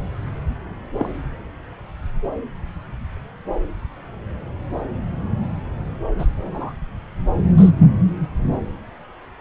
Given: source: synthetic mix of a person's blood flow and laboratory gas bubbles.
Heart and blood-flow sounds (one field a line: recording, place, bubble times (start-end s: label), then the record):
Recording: Doppler ultrasound of blood flow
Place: subclavian vein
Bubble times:
0.98-1.09 s: bubbles
6.18-6.26 s: bubbles
6.37-6.73 s: bubbles
7.57-7.71 s: bubbles
7.77-7.86 s: bubbles
From the record:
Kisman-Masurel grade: 122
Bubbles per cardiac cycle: 1 to 2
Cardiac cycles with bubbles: 10 to 50%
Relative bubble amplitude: moderate (0.250 to 0.450)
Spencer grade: 2 (many but less than half of the cardiac periods contain bubble signals, singularly or in groups)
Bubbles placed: anywhere in the cardiac cycle